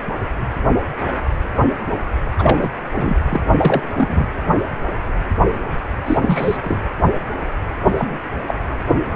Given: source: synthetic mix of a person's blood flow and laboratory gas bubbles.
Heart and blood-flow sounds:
Doppler ultrasound of blood flow; precordium
2.38-2.69 s: bubbles
2.97-3.17 s: bubbles
3.29-3.42 s: bubbles
3.53-3.83 s: bubbles
3.96-4.28 s: bubbles
6.05-6.17 s: bubbles
6.21-6.58 s: bubbles
6.63-6.79 s: bubbles
7.84-7.94 s: bubbles
7.97-8.17 s: bubbles
8.48-8.53 s: bubbles
From the record:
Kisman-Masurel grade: 222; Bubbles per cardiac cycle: several, 3 to 8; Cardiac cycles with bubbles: 10 to 50%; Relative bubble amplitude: moderate (0.250 to 0.450); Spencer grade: 2 (many but less than half of the cardiac periods contain bubble signals, singularly or in groups); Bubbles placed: anywhere in the cardiac cycle

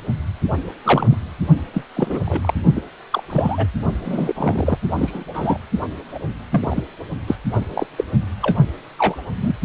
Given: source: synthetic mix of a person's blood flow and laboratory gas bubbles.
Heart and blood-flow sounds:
Doppler ultrasound of blood flow; precordium
0.84-1.17 s: bubbles
1.74-1.85 s: bubbles
1.96-2.54 s: bubbles
2.75-2.82 s: bubbles
3.12-3.23 s: bubbles
3.29-3.66 s: bubbles
4.04-4.78 s: bubbles
4.95-5.24 s: bubbles
5.33-5.60 s: bubbles
6.14-6.19 s: bubbles
6.50-6.83 s: bubbles
7.27-7.36 s: bubbles
7.52-7.62 s: bubbles
7.70-7.86 s: bubbles
7.97-8.04 s: bubbles
8.42-8.56 s: bubbles
8.98-9.15 s: bubbles
9.39-9.55 s: bubbles
From the record:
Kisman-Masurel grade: 242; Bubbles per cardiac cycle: several, 3 to 8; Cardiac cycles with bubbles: 100%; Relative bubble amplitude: moderate (0.250 to 0.450); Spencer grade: 3 (all of the cardiac periods contain showers or single bubble signals, but not dominating or overriding the cardiac motion signals); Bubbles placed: only in the low amplitude regions of the cardiac cycle

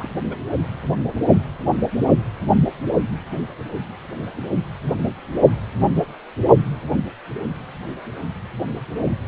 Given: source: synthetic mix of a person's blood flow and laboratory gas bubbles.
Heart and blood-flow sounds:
Doppler ultrasound of blood flow; precordium
0.00-0.11 s: bubbles
0.29-0.37 s: bubbles
0.51-0.67 s: bubbles
From the record:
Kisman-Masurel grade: 221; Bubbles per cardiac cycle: several, 3 to 8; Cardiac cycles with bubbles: 10 to 50%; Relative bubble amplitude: barely perceptible (0.100 to 0.250); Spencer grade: 2 (many but less than half of the cardiac periods contain bubble signals, singularly or in groups); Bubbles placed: only in the low amplitude regions of the cardiac cycle

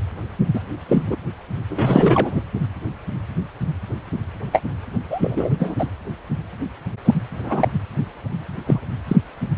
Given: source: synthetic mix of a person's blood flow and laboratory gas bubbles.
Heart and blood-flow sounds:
Doppler ultrasound of blood flow; precordium
0.53-0.60 s: bubbles
0.89-1.03 s: bubbles
1.06-1.16 s: bubbles
1.70-2.41 s: bubbles
4.53-4.62 s: bubbles
5.09-5.50 s: bubbles
5.59-5.75 s: bubbles
5.79-5.87 s: bubbles
7.04-7.14 s: bubbles
7.44-7.69 s: bubbles
8.65-8.81 s: bubbles
9.07-9.16 s: bubbles
From the record:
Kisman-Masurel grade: 233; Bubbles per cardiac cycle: several, 3 to 8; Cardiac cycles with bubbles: 50 to 99%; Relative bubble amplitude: loud (0.450 to 0.775); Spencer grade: 3 (all of the cardiac periods contain showers or single bubble signals, but not dominating or overriding the cardiac motion signals); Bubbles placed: anywhere in the cardiac cycle

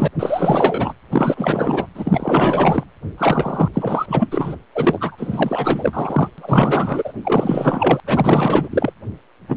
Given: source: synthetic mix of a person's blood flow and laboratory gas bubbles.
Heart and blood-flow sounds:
Doppler ultrasound of blood flow; precordium
0.00-0.08 s: bubbles
0.19-0.93 s: bubbles
1.11-1.86 s: bubbles
1.95-2.84 s: bubbles
3.18-3.68 s: bubbles
3.74-4.28 s: bubbles
4.31-4.56 s: bubbles
4.75-6.29 s: bubbles
6.38-7.13 s: bubbles
7.25-8.00 s: bubbles
8.05-8.93 s: bubbles
9.48-9.57 s: bubbles
From the record:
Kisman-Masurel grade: 444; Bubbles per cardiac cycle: continuous sound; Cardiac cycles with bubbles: 100%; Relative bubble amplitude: maximal (0.775 to 0.999); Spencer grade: 4 (maximum detectable bubble signal sounding continuously throughout systole and diastole of every cardiac period, and overriding the amplitude of the normal cardiac signals); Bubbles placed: anywhere in the cardiac cycle

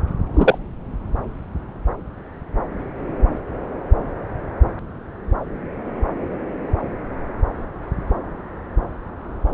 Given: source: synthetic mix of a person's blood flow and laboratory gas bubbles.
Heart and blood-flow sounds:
Doppler ultrasound of blood flow; subclavian vein
0.33-0.58 s: bubbles
From the record:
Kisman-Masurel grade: 113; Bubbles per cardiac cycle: 1 to 2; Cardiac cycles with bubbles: 1 to 10%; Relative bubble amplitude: loud (0.450 to 0.775); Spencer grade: 1 (occasional bubble signal discernible with the cardiac motion signal, with majority of cardiac periods free of bubbles); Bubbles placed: anywhere in the cardiac cycle

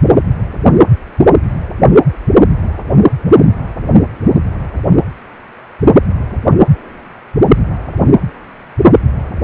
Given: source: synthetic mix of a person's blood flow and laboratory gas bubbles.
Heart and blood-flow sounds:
Doppler ultrasound of blood flow; precordium
no bubbles
From the record:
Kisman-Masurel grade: 000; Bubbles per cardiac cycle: 0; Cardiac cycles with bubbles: 0%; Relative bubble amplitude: no bubbles discernible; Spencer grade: 0 (complete lack of bubble signals)

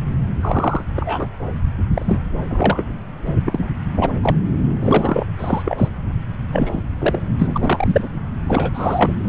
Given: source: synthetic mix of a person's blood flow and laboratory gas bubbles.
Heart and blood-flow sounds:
Doppler ultrasound of blood flow; subclavian vein
0.41-0.83 s: bubbles
0.96-1.27 s: bubbles
1.92-2.23 s: bubbles
2.48-2.83 s: bubbles
3.26-3.29 s: bubbles
3.46-3.72 s: bubbles
3.96-4.13 s: bubbles
4.22-4.38 s: bubbles
4.79-5.26 s: bubbles
5.38-5.88 s: bubbles
6.52-6.81 s: bubbles
6.99-7.19 s: bubbles
7.38-8.09 s: bubbles
8.48-9.13 s: bubbles
9.26-9.29 s: bubbles
From the record:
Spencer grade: 3 (all of the cardiac periods contain showers or single bubble signals, but not dominating or overriding the cardiac motion signals); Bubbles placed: anywhere in the cardiac cycle

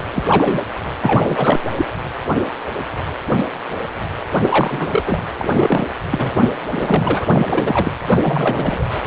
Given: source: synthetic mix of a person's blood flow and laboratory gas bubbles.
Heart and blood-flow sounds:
Doppler ultrasound of blood flow; precordium
0.13-0.24 s: bubbles
0.28-0.60 s: bubbles
1.01-1.59 s: bubbles
1.77-1.86 s: bubbles
4.42-5.23 s: bubbles
5.38-5.92 s: bubbles
6.12-6.49 s: bubbles
6.72-7.92 s: bubbles
8.10-8.87 s: bubbles
From the record:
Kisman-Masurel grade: 332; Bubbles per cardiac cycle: rolling drumbeat, 9 or more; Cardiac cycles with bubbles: 50 to 99%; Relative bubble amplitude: moderate (0.250 to 0.450); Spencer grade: 3 (all of the cardiac periods contain showers or single bubble signals, but not dominating or overriding the cardiac motion signals); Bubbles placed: anywhere in the cardiac cycle

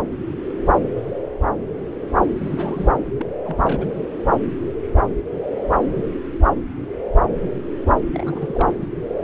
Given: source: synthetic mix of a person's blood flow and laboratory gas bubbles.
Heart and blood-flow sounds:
Doppler ultrasound of blood flow; subclavian vein
2.38-2.90 s: bubbles
3.19-3.27 s: bubbles
3.44-3.86 s: bubbles
8.11-8.86 s: bubbles
From the record:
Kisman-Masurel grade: 221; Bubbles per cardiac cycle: several, 3 to 8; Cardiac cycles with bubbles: 10 to 50%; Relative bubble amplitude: barely perceptible (0.100 to 0.250); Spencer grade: 2 (many but less than half of the cardiac periods contain bubble signals, singularly or in groups); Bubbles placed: anywhere in the cardiac cycle

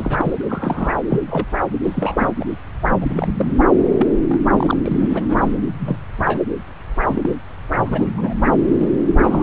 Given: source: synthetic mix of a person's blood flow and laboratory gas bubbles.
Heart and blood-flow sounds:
Doppler ultrasound of blood flow; subclavian vein
0.00-0.33 s: bubbles
0.49-0.92 s: bubbles
1.10-1.21 s: bubbles
1.27-1.46 s: bubbles
1.84-2.31 s: bubbles
2.40-2.46 s: bubbles
3.00-3.27 s: bubbles
3.37-3.53 s: bubbles
3.98-4.08 s: bubbles
4.28-4.42 s: bubbles
4.50-4.77 s: bubbles
4.85-5.54 s: bubbles
5.79-5.97 s: bubbles
6.18-6.41 s: bubbles
7.06-7.34 s: bubbles
7.82-8.07 s: bubbles
8.17-8.33 s: bubbles
8.79-8.89 s: bubbles
9.18-9.43 s: bubbles
From the record:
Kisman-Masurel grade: 242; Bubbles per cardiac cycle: several, 3 to 8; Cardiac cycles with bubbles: 100%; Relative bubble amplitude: moderate (0.250 to 0.450); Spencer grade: 3 (all of the cardiac periods contain showers or single bubble signals, but not dominating or overriding the cardiac motion signals); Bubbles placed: anywhere in the cardiac cycle

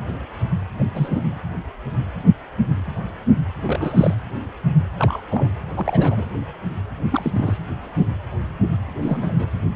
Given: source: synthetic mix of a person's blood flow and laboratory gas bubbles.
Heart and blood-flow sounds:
Doppler ultrasound of blood flow; precordium
0.79-0.84 s: bubbles
0.94-1.33 s: bubbles
3.62-4.14 s: bubbles
4.98-5.21 s: bubbles
5.31-5.50 s: bubbles
5.76-6.25 s: bubbles
7.11-7.57 s: bubbles
9.02-9.46 s: bubbles
From the record:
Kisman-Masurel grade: 222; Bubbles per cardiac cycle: several, 3 to 8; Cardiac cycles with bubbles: 10 to 50%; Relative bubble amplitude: moderate (0.250 to 0.450); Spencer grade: 2 (many but less than half of the cardiac periods contain bubble signals, singularly or in groups); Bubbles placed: anywhere in the cardiac cycle

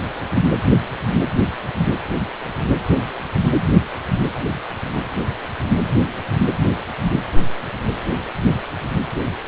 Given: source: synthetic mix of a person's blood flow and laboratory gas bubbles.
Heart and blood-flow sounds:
Doppler ultrasound of blood flow; precordium
no bubbles
From the record:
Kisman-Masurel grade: 000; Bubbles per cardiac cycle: 0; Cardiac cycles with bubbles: 0%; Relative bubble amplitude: no bubbles discernible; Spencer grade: 0 (complete lack of bubble signals)

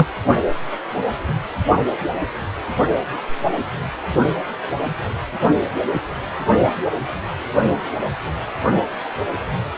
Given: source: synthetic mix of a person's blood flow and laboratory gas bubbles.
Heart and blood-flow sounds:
Doppler ultrasound of blood flow; precordium
0.00-0.07 s: bubbles
From the record:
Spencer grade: 2 (many but less than half of the cardiac periods contain bubble signals, singularly or in groups); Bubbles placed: only in the low amplitude regions of the cardiac cycle

